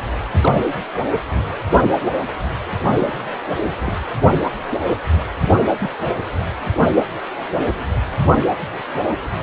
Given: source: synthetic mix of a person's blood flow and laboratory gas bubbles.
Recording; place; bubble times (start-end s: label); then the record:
Doppler ultrasound of blood flow; precordium
0.41-0.56 s: bubbles
2.96-3.14 s: bubbles
3.82-3.93 s: bubbles
5.78-5.89 s: bubbles
6.80-7.06 s: bubbles
From the record:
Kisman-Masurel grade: 121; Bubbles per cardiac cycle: 1 to 2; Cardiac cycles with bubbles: 10 to 50%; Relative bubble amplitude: barely perceptible (0.100 to 0.250); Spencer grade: 2 (many but less than half of the cardiac periods contain bubble signals, singularly or in groups); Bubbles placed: anywhere in the cardiac cycle